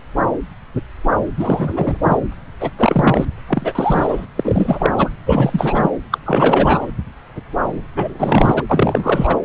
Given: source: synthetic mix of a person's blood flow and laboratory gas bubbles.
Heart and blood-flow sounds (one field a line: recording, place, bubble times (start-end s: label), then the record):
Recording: Doppler ultrasound of blood flow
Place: subclavian vein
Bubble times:
1.37-1.97 s: bubbles
2.02-2.17 s: bubbles
2.59-2.70 s: bubbles
2.78-3.25 s: bubbles
3.47-4.26 s: bubbles
4.36-4.91 s: bubbles
4.98-5.09 s: bubbles
5.25-5.90 s: bubbles
6.12-6.18 s: bubbles
6.25-6.87 s: bubbles
7.96-8.62 s: bubbles
8.69-9.38 s: bubbles
From the record:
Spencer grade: 3 (all of the cardiac periods contain showers or single bubble signals, but not dominating or overriding the cardiac motion signals)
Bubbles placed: anywhere in the cardiac cycle